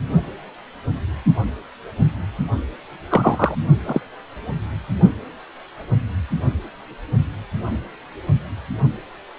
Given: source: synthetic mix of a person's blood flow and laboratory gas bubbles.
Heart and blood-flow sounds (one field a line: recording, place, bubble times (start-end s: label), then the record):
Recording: Doppler ultrasound of blood flow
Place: precordium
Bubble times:
3.09-3.55 s: bubbles
3.86-4.00 s: bubbles
From the record:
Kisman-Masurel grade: 123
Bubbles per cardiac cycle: 1 to 2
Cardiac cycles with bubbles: 10 to 50%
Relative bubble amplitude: loud (0.450 to 0.775)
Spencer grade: 2 (many but less than half of the cardiac periods contain bubble signals, singularly or in groups)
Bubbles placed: only in the low amplitude regions of the cardiac cycle